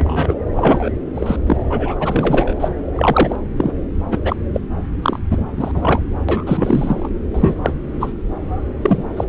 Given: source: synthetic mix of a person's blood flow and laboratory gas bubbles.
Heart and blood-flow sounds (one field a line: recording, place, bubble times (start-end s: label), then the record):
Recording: Doppler ultrasound of blood flow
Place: subclavian vein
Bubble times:
0.00-0.35 s: bubbles
0.56-0.90 s: bubbles
1.15-1.36 s: bubbles
1.46-1.64 s: bubbles
1.70-1.95 s: bubbles
1.99-2.54 s: bubbles
2.59-2.68 s: bubbles
2.96-3.36 s: bubbles
3.57-3.71 s: bubbles
4.11-4.19 s: bubbles
4.23-4.36 s: bubbles
4.54-4.60 s: bubbles
5.02-5.19 s: bubbles
5.31-5.41 s: bubbles
5.57-5.71 s: bubbles
5.74-6.02 s: bubbles
6.29-7.09 s: bubbles
7.33-7.54 s: bubbles
7.63-7.72 s: bubbles
8.00-8.12 s: bubbles
8.81-9.04 s: bubbles
9.16-9.24 s: bubbles
From the record:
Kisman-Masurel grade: 243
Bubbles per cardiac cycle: several, 3 to 8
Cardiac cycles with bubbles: 100%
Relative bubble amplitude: loud (0.450 to 0.775)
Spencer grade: 3 (all of the cardiac periods contain showers or single bubble signals, but not dominating or overriding the cardiac motion signals)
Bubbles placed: anywhere in the cardiac cycle